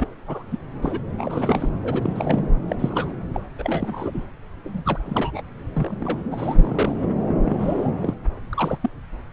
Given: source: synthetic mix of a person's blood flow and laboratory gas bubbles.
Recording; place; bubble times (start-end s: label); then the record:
Doppler ultrasound of blood flow; subclavian vein
0.00-0.08 s: bubbles
0.28-0.43 s: bubbles
0.52-0.58 s: bubbles
0.82-0.99 s: bubbles
1.18-1.70 s: bubbles
1.83-2.42 s: bubbles
2.68-2.76 s: bubbles
2.79-3.12 s: bubbles
3.34-3.40 s: bubbles
3.58-4.24 s: bubbles
4.64-4.83 s: bubbles
4.85-4.98 s: bubbles
5.05-5.42 s: bubbles
5.73-6.20 s: bubbles
6.30-6.97 s: bubbles
7.01-7.09 s: bubbles
7.45-7.90 s: bubbles
8.00-8.14 s: bubbles
8.53-8.78 s: bubbles
8.81-8.89 s: bubbles
From the record:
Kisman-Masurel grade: 242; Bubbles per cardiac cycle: several, 3 to 8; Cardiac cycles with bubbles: 100%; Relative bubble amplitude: moderate (0.250 to 0.450); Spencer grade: 3 (all of the cardiac periods contain showers or single bubble signals, but not dominating or overriding the cardiac motion signals); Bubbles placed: anywhere in the cardiac cycle